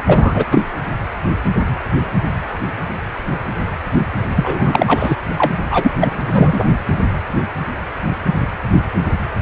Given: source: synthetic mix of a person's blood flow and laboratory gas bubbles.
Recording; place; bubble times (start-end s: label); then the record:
Doppler ultrasound of blood flow; precordium
0.00-0.02 s: bubbles
0.07-0.44 s: bubbles
0.51-0.62 s: bubbles
4.35-5.16 s: bubbles
5.38-5.52 s: bubbles
5.70-5.91 s: bubbles
6.00-6.18 s: bubbles
6.25-6.65 s: bubbles
From the record:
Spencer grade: 2 (many but less than half of the cardiac periods contain bubble signals, singularly or in groups); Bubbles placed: anywhere in the cardiac cycle